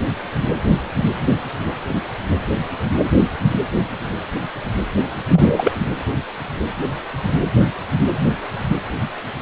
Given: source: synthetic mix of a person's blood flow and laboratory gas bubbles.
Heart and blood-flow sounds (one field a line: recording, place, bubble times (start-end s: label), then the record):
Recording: Doppler ultrasound of blood flow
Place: precordium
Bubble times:
5.28-5.72 s: bubbles
From the record:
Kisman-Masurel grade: 213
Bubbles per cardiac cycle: several, 3 to 8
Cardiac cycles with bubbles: 1 to 10%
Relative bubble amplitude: loud (0.450 to 0.775)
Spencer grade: 1 (occasional bubble signal discernible with the cardiac motion signal, with majority of cardiac periods free of bubbles)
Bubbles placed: anywhere in the cardiac cycle